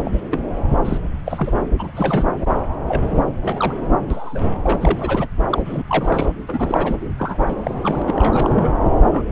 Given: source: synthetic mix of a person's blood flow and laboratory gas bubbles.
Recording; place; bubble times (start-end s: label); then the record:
Doppler ultrasound of blood flow; subclavian vein
0.04-0.22 s: bubbles
0.32-0.45 s: bubbles
0.85-0.97 s: bubbles
1.25-1.52 s: bubbles
1.78-1.91 s: bubbles
1.95-2.28 s: bubbles
2.88-3.02 s: bubbles
3.10-3.24 s: bubbles
3.42-3.75 s: bubbles
4.10-4.40 s: bubbles
4.63-5.27 s: bubbles
5.50-5.62 s: bubbles
5.64-5.83 s: bubbles
5.88-6.33 s: bubbles
6.49-6.96 s: bubbles
7.17-7.54 s: bubbles
7.62-7.75 s: bubbles
7.80-8.02 s: bubbles
8.07-8.70 s: bubbles
9.00-9.08 s: bubbles
9.12-9.23 s: bubbles
From the record:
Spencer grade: 3 (all of the cardiac periods contain showers or single bubble signals, but not dominating or overriding the cardiac motion signals); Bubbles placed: anywhere in the cardiac cycle